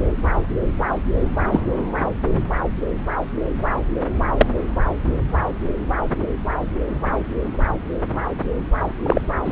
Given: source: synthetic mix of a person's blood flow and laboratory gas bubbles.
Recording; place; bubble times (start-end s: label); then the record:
Doppler ultrasound of blood flow; subclavian vein
1.52-1.62 s: bubbles
4.37-4.46 s: bubbles
9.03-9.21 s: bubbles
9.45-9.52 s: bubbles
From the record:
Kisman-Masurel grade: 123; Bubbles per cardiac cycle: 1 to 2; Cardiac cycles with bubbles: 10 to 50%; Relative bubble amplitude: loud (0.450 to 0.775); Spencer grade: 2 (many but less than half of the cardiac periods contain bubble signals, singularly or in groups); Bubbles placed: anywhere in the cardiac cycle